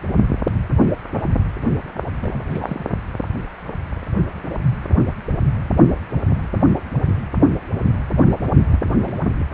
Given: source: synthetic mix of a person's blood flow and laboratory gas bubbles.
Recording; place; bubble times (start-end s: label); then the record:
Doppler ultrasound of blood flow; precordium
1.85-1.89 s: bubbles
2.22-2.42 s: bubbles
2.46-2.84 s: bubbles
8.71-8.79 s: bubbles
8.84-9.14 s: bubbles
From the record:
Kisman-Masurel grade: 221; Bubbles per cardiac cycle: several, 3 to 8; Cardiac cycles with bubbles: 10 to 50%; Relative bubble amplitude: barely perceptible (0.100 to 0.250); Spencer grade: 2 (many but less than half of the cardiac periods contain bubble signals, singularly or in groups); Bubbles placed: only in the low amplitude regions of the cardiac cycle